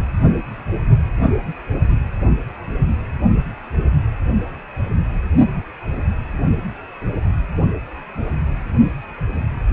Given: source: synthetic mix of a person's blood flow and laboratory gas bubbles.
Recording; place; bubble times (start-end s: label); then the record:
Doppler ultrasound of blood flow; precordium
no bubbles
From the record:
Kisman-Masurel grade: 000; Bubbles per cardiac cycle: 0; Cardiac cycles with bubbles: 0%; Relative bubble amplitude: no bubbles discernible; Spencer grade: 0 (complete lack of bubble signals)